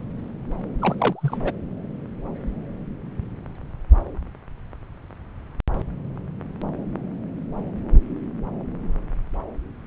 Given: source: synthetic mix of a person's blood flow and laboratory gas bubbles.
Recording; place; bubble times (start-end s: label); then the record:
Doppler ultrasound of blood flow; subclavian vein
0.79-0.95 s: bubbles
0.98-1.38 s: bubbles
1.44-1.53 s: bubbles
From the record:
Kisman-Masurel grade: 211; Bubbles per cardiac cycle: several, 3 to 8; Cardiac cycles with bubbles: 1 to 10%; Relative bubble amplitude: barely perceptible (0.100 to 0.250); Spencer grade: 1 (occasional bubble signal discernible with the cardiac motion signal, with majority of cardiac periods free of bubbles); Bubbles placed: anywhere in the cardiac cycle